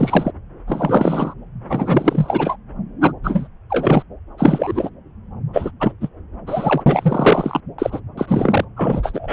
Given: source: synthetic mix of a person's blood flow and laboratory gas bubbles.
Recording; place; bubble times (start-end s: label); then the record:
Doppler ultrasound of blood flow; subclavian vein
0.00-0.31 s: bubbles
0.67-1.34 s: bubbles
1.69-2.56 s: bubbles
3.01-3.12 s: bubbles
3.24-3.48 s: bubbles
3.70-4.03 s: bubbles
4.38-4.90 s: bubbles
5.53-5.71 s: bubbles
5.80-5.92 s: bubbles
6.00-6.08 s: bubbles
6.46-6.83 s: bubbles
6.86-7.61 s: bubbles
7.78-8.00 s: bubbles
8.17-8.64 s: bubbles
8.76-9.33 s: bubbles
From the record:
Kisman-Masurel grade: 343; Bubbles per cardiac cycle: rolling drumbeat, 9 or more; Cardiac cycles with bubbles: 100%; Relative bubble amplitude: loud (0.450 to 0.775); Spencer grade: 3 (all of the cardiac periods contain showers or single bubble signals, but not dominating or overriding the cardiac motion signals); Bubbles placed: anywhere in the cardiac cycle